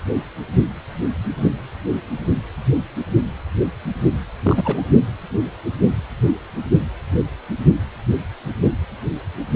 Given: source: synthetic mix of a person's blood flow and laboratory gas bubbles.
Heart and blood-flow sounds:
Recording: Doppler ultrasound of blood flow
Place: precordium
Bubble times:
4.42-4.82 s: bubbles
From the record:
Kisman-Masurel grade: 212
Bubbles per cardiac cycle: several, 3 to 8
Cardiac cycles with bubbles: 1 to 10%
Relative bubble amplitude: moderate (0.250 to 0.450)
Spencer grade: 1 (occasional bubble signal discernible with the cardiac motion signal, with majority of cardiac periods free of bubbles)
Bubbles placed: anywhere in the cardiac cycle

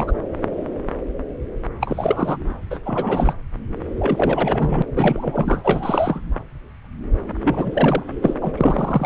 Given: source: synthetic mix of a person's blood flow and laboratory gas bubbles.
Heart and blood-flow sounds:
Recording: Doppler ultrasound of blood flow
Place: subclavian vein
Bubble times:
0.00-0.12 s: bubbles
1.80-2.37 s: bubbles
2.70-2.79 s: bubbles
2.86-3.34 s: bubbles
3.98-4.83 s: bubbles
4.96-5.60 s: bubbles
5.63-6.21 s: bubbles
7.42-8.04 s: bubbles
8.21-8.34 s: bubbles
8.40-8.52 s: bubbles
8.57-9.06 s: bubbles
From the record:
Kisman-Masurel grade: 333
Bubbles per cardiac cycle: rolling drumbeat, 9 or more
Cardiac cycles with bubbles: 50 to 99%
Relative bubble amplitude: loud (0.450 to 0.775)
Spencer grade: 3 (all of the cardiac periods contain showers or single bubble signals, but not dominating or overriding the cardiac motion signals)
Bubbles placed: anywhere in the cardiac cycle

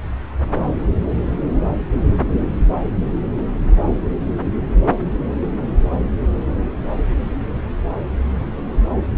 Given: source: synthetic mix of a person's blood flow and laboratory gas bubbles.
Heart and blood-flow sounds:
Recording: Doppler ultrasound of blood flow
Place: subclavian vein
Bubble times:
4.76-4.81 s: bubbles
From the record:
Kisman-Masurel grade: 111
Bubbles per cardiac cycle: 1 to 2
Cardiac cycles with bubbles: 1 to 10%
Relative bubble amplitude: barely perceptible (0.100 to 0.250)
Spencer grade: 1 (occasional bubble signal discernible with the cardiac motion signal, with majority of cardiac periods free of bubbles)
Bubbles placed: anywhere in the cardiac cycle

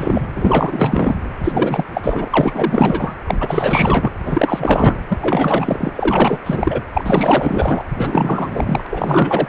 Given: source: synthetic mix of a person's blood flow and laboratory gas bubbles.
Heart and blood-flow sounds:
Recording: Doppler ultrasound of blood flow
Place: precordium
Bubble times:
0.00-0.28 s: bubbles
0.36-1.15 s: bubbles
1.35-1.85 s: bubbles
1.93-3.15 s: bubbles
3.27-4.10 s: bubbles
4.24-5.01 s: bubbles
5.09-5.93 s: bubbles
5.96-6.39 s: bubbles
6.46-6.81 s: bubbles
6.94-7.85 s: bubbles
7.96-8.87 s: bubbles
8.90-9.49 s: bubbles
From the record:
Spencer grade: 4 (maximum detectable bubble signal sounding continuously throughout systole and diastole of every cardiac period, and overriding the amplitude of the normal cardiac signals)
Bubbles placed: anywhere in the cardiac cycle

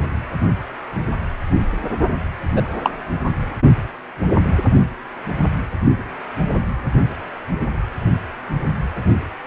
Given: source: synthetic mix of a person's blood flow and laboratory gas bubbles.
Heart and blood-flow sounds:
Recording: Doppler ultrasound of blood flow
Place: precordium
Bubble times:
2.56-2.62 s: bubbles
2.83-2.91 s: bubbles
From the record:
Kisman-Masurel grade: 123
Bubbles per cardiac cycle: 1 to 2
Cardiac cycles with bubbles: 10 to 50%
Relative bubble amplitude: loud (0.450 to 0.775)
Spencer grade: 2 (many but less than half of the cardiac periods contain bubble signals, singularly or in groups)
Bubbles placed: anywhere in the cardiac cycle

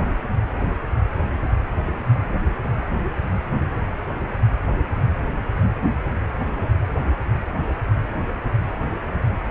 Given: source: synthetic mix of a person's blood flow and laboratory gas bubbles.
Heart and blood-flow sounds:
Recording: Doppler ultrasound of blood flow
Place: precordium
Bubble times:
no bubbles
From the record:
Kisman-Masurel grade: 000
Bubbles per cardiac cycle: 0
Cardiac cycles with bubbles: 0%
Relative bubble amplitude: no bubbles discernible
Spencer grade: 0 (complete lack of bubble signals)

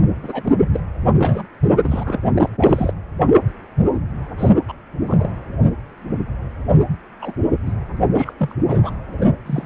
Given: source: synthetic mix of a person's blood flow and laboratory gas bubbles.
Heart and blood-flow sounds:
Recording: Doppler ultrasound of blood flow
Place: precordium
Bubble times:
0.22-0.54 s: bubbles
0.60-0.69 s: bubbles
0.72-0.81 s: bubbles
1.17-1.47 s: bubbles
1.82-2.03 s: bubbles
2.06-2.21 s: bubbles
2.34-2.50 s: bubbles
2.57-2.94 s: bubbles
4.38-4.50 s: bubbles
4.68-4.72 s: bubbles
5.06-5.31 s: bubbles
7.21-7.33 s: bubbles
7.66-7.72 s: bubbles
8.16-8.33 s: bubbles
8.39-8.53 s: bubbles
8.68-8.90 s: bubbles
9.19-9.26 s: bubbles
9.46-9.66 s: bubbles
From the record:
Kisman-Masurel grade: 232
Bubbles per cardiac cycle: several, 3 to 8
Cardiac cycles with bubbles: 50 to 99%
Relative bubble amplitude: moderate (0.250 to 0.450)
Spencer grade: 3 (all of the cardiac periods contain showers or single bubble signals, but not dominating or overriding the cardiac motion signals)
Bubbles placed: anywhere in the cardiac cycle

